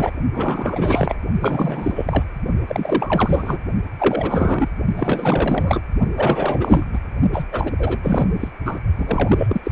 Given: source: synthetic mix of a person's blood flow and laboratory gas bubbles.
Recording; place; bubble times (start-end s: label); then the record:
Doppler ultrasound of blood flow; precordium
0.00-0.12 s: bubbles
0.33-1.15 s: bubbles
1.40-2.25 s: bubbles
2.68-3.59 s: bubbles
3.98-4.69 s: bubbles
4.96-5.81 s: bubbles
6.14-6.85 s: bubbles
6.92-6.99 s: bubbles
7.32-7.46 s: bubbles
7.51-7.71 s: bubbles
7.78-7.99 s: bubbles
8.02-8.28 s: bubbles
8.39-8.48 s: bubbles
8.64-8.79 s: bubbles
8.96-9.61 s: bubbles
9.63-9.71 s: bubbles
From the record:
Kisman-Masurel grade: 444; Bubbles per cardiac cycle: continuous sound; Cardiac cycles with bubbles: 100%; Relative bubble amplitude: maximal (0.775 to 0.999); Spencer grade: 4 (maximum detectable bubble signal sounding continuously throughout systole and diastole of every cardiac period, and overriding the amplitude of the normal cardiac signals); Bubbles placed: only in the low amplitude regions of the cardiac cycle